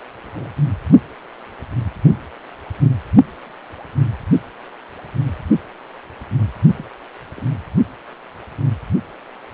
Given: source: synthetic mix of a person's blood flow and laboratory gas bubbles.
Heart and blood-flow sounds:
Doppler ultrasound of blood flow; precordium
0.26-0.29 s: bubbles
0.33-0.53 s: bubbles
6.77-6.84 s: bubbles
7.34-7.40 s: bubbles
From the record:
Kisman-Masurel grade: 121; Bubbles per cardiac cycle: 1 to 2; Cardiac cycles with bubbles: 10 to 50%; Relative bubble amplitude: barely perceptible (0.100 to 0.250); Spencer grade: 2 (many but less than half of the cardiac periods contain bubble signals, singularly or in groups); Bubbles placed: only in the low amplitude regions of the cardiac cycle

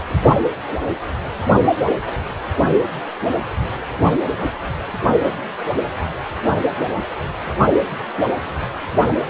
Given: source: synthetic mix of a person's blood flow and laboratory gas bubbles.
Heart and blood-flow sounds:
Doppler ultrasound of blood flow; precordium
no bubbles
From the record:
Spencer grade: 0 (complete lack of bubble signals)

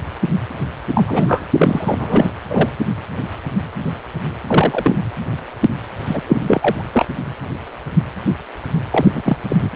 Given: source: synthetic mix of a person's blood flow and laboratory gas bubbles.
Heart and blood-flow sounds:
Doppler ultrasound of blood flow; precordium
0.94-1.04 s: bubbles
1.07-1.44 s: bubbles
1.54-1.94 s: bubbles
1.98-2.31 s: bubbles
2.48-2.69 s: bubbles
4.47-4.96 s: bubbles
6.08-6.22 s: bubbles
6.28-6.38 s: bubbles
6.46-6.86 s: bubbles
6.92-7.05 s: bubbles
8.91-9.37 s: bubbles
9.48-9.70 s: bubbles
From the record:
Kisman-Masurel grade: 233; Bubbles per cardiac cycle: several, 3 to 8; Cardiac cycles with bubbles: 50 to 99%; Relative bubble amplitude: loud (0.450 to 0.775); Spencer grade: 3 (all of the cardiac periods contain showers or single bubble signals, but not dominating or overriding the cardiac motion signals); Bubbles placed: anywhere in the cardiac cycle

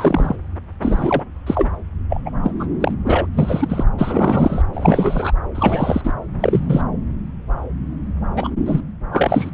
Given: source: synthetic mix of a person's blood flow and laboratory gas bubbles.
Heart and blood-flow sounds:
Doppler ultrasound of blood flow; subclavian vein
0.00-0.36 s: bubbles
0.81-1.23 s: bubbles
1.46-1.69 s: bubbles
2.10-2.21 s: bubbles
2.25-2.31 s: bubbles
2.43-2.52 s: bubbles
2.60-2.66 s: bubbles
2.81-2.95 s: bubbles
3.04-3.27 s: bubbles
3.35-3.84 s: bubbles
3.98-4.62 s: bubbles
4.73-5.33 s: bubbles
5.54-6.13 s: bubbles
6.40-6.83 s: bubbles
8.35-8.49 s: bubbles
8.66-8.80 s: bubbles
9.12-9.50 s: bubbles
From the record:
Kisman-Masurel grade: 233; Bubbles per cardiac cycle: several, 3 to 8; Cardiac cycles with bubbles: 50 to 99%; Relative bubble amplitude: loud (0.450 to 0.775); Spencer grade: 3 (all of the cardiac periods contain showers or single bubble signals, but not dominating or overriding the cardiac motion signals); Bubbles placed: anywhere in the cardiac cycle

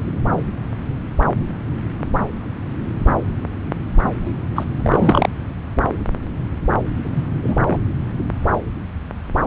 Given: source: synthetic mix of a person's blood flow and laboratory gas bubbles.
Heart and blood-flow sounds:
Doppler ultrasound of blood flow; subclavian vein
4.25-4.31 s: bubbles
4.55-4.64 s: bubbles
4.73-5.29 s: bubbles
7.04-7.23 s: bubbles
7.42-7.55 s: bubbles
7.65-7.79 s: bubbles
From the record:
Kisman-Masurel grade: 223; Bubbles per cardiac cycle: several, 3 to 8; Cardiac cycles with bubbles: 10 to 50%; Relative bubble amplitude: loud (0.450 to 0.775); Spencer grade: 2 (many but less than half of the cardiac periods contain bubble signals, singularly or in groups); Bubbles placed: anywhere in the cardiac cycle

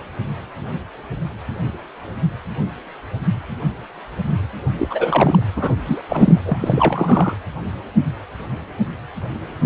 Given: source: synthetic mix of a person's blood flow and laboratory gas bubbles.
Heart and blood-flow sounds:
Doppler ultrasound of blood flow; precordium
4.78-5.43 s: bubbles
5.55-5.76 s: bubbles
5.86-6.01 s: bubbles
6.08-6.41 s: bubbles
6.45-6.57 s: bubbles
6.59-7.37 s: bubbles
From the record:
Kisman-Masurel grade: 222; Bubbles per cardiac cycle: several, 3 to 8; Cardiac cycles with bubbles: 10 to 50%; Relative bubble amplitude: moderate (0.250 to 0.450); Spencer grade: 2 (many but less than half of the cardiac periods contain bubble signals, singularly or in groups); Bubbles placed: anywhere in the cardiac cycle

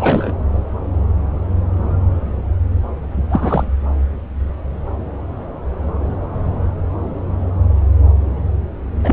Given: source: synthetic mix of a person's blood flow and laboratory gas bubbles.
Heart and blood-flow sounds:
Doppler ultrasound of blood flow; subclavian vein
0.00-0.33 s: bubbles
3.29-3.70 s: bubbles
9.04-9.13 s: bubbles
From the record:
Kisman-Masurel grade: 223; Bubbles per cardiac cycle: several, 3 to 8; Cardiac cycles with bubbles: 10 to 50%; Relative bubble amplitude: loud (0.450 to 0.775); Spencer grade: 2 (many but less than half of the cardiac periods contain bubble signals, singularly or in groups); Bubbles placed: anywhere in the cardiac cycle

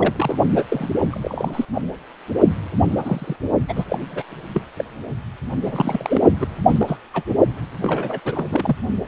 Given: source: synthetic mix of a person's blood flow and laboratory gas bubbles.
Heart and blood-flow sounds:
Doppler ultrasound of blood flow; precordium
0.00-0.36 s: bubbles
0.56-0.64 s: bubbles
0.68-0.90 s: bubbles
1.10-1.65 s: bubbles
1.73-1.81 s: bubbles
2.88-3.36 s: bubbles
3.69-3.85 s: bubbles
3.89-3.98 s: bubbles
4.12-4.24 s: bubbles
4.54-4.62 s: bubbles
4.77-4.85 s: bubbles
5.66-6.23 s: bubbles
6.40-6.46 s: bubbles
6.68-6.98 s: bubbles
7.14-7.23 s: bubbles
7.82-8.20 s: bubbles
8.25-8.46 s: bubbles
8.49-8.76 s: bubbles
From the record:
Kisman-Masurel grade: 232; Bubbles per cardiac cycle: several, 3 to 8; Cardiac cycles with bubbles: 50 to 99%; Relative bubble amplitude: moderate (0.250 to 0.450); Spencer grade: 3 (all of the cardiac periods contain showers or single bubble signals, but not dominating or overriding the cardiac motion signals); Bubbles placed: only in the low amplitude regions of the cardiac cycle

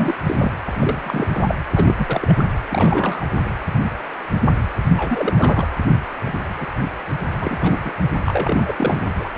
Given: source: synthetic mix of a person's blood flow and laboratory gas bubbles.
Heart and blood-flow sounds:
Doppler ultrasound of blood flow; precordium
0.00-0.14 s: bubbles
0.26-0.49 s: bubbles
0.66-0.70 s: bubbles
0.79-1.27 s: bubbles
1.31-1.55 s: bubbles
1.75-2.45 s: bubbles
2.69-3.26 s: bubbles
4.97-5.35 s: bubbles
5.37-5.68 s: bubbles
6.26-6.32 s: bubbles
6.59-6.67 s: bubbles
7.41-7.93 s: bubbles
8.25-8.74 s: bubbles
8.78-9.11 s: bubbles
9.19-9.29 s: bubbles
From the record:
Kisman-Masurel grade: 332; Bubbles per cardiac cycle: rolling drumbeat, 9 or more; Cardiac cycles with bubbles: 50 to 99%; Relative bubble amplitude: moderate (0.250 to 0.450); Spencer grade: 3 (all of the cardiac periods contain showers or single bubble signals, but not dominating or overriding the cardiac motion signals); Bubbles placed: anywhere in the cardiac cycle

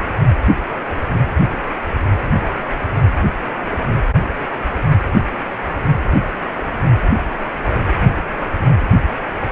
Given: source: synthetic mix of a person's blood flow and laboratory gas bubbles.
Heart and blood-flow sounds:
Doppler ultrasound of blood flow; precordium
no bubbles
From the record:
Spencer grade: 0 (complete lack of bubble signals)

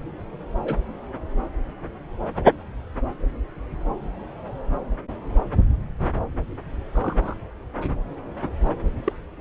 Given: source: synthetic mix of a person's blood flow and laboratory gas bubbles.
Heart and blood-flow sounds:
Doppler ultrasound of blood flow; subclavian vein
0.63-0.75 s: bubbles
6.95-7.34 s: bubbles
9.04-9.12 s: bubbles
From the record:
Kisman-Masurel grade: 122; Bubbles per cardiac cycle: 1 to 2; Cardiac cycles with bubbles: 10 to 50%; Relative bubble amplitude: moderate (0.250 to 0.450); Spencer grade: 2 (many but less than half of the cardiac periods contain bubble signals, singularly or in groups); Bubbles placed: anywhere in the cardiac cycle

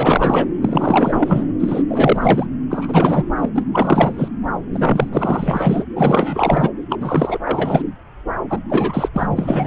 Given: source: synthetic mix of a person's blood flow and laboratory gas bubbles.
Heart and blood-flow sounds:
Doppler ultrasound of blood flow; subclavian vein
0.00-0.47 s: bubbles
0.61-1.44 s: bubbles
1.59-1.83 s: bubbles
1.89-2.46 s: bubbles
2.70-3.26 s: bubbles
3.37-3.50 s: bubbles
3.54-3.64 s: bubbles
3.72-4.28 s: bubbles
4.72-5.84 s: bubbles
5.95-6.69 s: bubbles
6.89-6.97 s: bubbles
7.00-7.39 s: bubbles
7.45-7.82 s: bubbles
8.49-8.59 s: bubbles
8.70-9.09 s: bubbles
9.13-9.67 s: bubbles
From the record:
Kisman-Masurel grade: 444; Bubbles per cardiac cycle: continuous sound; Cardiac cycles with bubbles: 100%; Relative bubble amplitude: maximal (0.775 to 0.999); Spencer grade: 4 (maximum detectable bubble signal sounding continuously throughout systole and diastole of every cardiac period, and overriding the amplitude of the normal cardiac signals); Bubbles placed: anywhere in the cardiac cycle

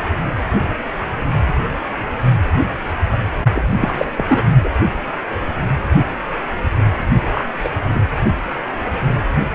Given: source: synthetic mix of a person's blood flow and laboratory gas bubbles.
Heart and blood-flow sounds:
Doppler ultrasound of blood flow; precordium
3.54-4.09 s: bubbles
4.16-4.25 s: bubbles
4.28-4.49 s: bubbles
4.64-4.68 s: bubbles
7.34-7.46 s: bubbles
7.64-7.69 s: bubbles
7.94-8.00 s: bubbles
From the record:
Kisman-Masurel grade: 223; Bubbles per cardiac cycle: several, 3 to 8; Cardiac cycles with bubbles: 10 to 50%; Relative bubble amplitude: loud (0.450 to 0.775); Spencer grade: 2 (many but less than half of the cardiac periods contain bubble signals, singularly or in groups); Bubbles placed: only in the low amplitude regions of the cardiac cycle

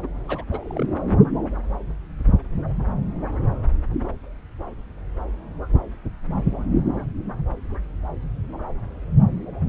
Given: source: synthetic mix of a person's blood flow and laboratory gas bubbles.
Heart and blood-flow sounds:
Doppler ultrasound of blood flow; subclavian vein
0.02-0.07 s: bubbles
0.28-0.44 s: bubbles
0.51-0.60 s: bubbles
0.62-0.86 s: bubbles
From the record:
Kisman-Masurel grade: 221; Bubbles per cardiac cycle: several, 3 to 8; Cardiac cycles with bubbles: 10 to 50%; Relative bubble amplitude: barely perceptible (0.100 to 0.250); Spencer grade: 2 (many but less than half of the cardiac periods contain bubble signals, singularly or in groups); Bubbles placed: anywhere in the cardiac cycle

